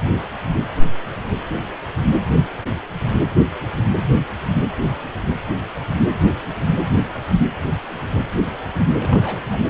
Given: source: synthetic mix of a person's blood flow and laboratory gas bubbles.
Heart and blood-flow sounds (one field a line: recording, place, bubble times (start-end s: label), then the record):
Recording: Doppler ultrasound of blood flow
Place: precordium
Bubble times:
9.01-9.42 s: bubbles
9.52-9.61 s: bubbles
From the record:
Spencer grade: 1 (occasional bubble signal discernible with the cardiac motion signal, with majority of cardiac periods free of bubbles)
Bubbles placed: anywhere in the cardiac cycle